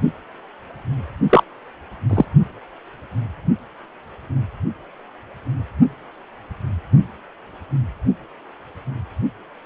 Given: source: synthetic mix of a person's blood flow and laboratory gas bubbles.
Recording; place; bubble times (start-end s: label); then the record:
Doppler ultrasound of blood flow; precordium
1.29-1.44 s: bubbles
2.09-2.25 s: bubbles
From the record:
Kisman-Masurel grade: 123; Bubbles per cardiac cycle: 1 to 2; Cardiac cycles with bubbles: 10 to 50%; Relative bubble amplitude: loud (0.450 to 0.775); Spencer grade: 2 (many but less than half of the cardiac periods contain bubble signals, singularly or in groups); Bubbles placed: only in the low amplitude regions of the cardiac cycle